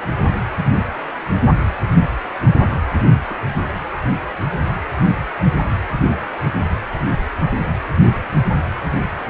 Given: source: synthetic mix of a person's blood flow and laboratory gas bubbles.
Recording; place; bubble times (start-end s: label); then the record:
Doppler ultrasound of blood flow; precordium
3.30-3.35 s: bubbles
From the record:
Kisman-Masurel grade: 112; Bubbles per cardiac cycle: 1 to 2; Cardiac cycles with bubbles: 1 to 10%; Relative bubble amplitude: moderate (0.250 to 0.450); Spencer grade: 1 (occasional bubble signal discernible with the cardiac motion signal, with majority of cardiac periods free of bubbles); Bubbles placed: anywhere in the cardiac cycle